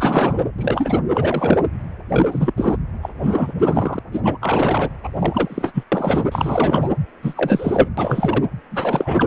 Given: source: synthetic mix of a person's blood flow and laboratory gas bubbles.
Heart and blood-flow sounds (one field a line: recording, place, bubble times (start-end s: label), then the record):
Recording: Doppler ultrasound of blood flow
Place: precordium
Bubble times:
0.00-0.48 s: bubbles
0.57-0.99 s: bubbles
1.13-1.68 s: bubbles
2.10-2.54 s: bubbles
2.57-2.78 s: bubbles
3.03-3.10 s: bubbles
3.21-3.54 s: bubbles
3.59-3.99 s: bubbles
4.12-4.21 s: bubbles
4.24-4.37 s: bubbles
4.41-4.89 s: bubbles
5.04-5.09 s: bubbles
5.15-5.84 s: bubbles
5.92-6.24 s: bubbles
6.32-6.91 s: bubbles
7.23-7.89 s: bubbles
7.97-8.43 s: bubbles
8.71-9.27 s: bubbles
From the record:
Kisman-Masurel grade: 343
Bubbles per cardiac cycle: rolling drumbeat, 9 or more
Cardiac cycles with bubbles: 100%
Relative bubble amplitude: loud (0.450 to 0.775)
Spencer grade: 3 (all of the cardiac periods contain showers or single bubble signals, but not dominating or overriding the cardiac motion signals)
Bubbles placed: anywhere in the cardiac cycle